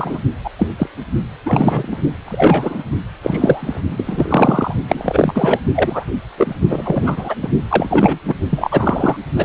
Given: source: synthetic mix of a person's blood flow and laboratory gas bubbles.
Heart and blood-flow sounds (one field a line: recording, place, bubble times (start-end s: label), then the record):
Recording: Doppler ultrasound of blood flow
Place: precordium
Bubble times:
0.00-0.19 s: bubbles
0.44-0.50 s: bubbles
0.59-0.67 s: bubbles
0.78-0.87 s: bubbles
1.46-1.97 s: bubbles
2.25-2.83 s: bubbles
3.23-3.81 s: bubbles
3.91-4.74 s: bubbles
4.88-5.60 s: bubbles
5.75-6.04 s: bubbles
6.37-6.54 s: bubbles
6.69-7.36 s: bubbles
7.42-7.49 s: bubbles
7.70-8.18 s: bubbles
8.27-8.35 s: bubbles
8.50-9.16 s: bubbles
9.36-9.45 s: bubbles
From the record:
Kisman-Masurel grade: 233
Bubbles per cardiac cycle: several, 3 to 8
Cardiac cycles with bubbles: 50 to 99%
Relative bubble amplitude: loud (0.450 to 0.775)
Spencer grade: 3 (all of the cardiac periods contain showers or single bubble signals, but not dominating or overriding the cardiac motion signals)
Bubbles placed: only in the low amplitude regions of the cardiac cycle